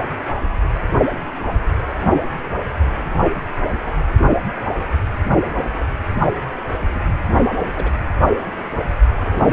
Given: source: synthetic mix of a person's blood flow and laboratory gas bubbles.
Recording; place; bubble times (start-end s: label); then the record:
Doppler ultrasound of blood flow; precordium
6.94-7.00 s: bubbles
7.76-7.91 s: bubbles
From the record:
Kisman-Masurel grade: 122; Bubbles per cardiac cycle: 1 to 2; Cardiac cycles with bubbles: 10 to 50%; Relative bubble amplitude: moderate (0.250 to 0.450); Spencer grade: 2 (many but less than half of the cardiac periods contain bubble signals, singularly or in groups); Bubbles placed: only in the low amplitude regions of the cardiac cycle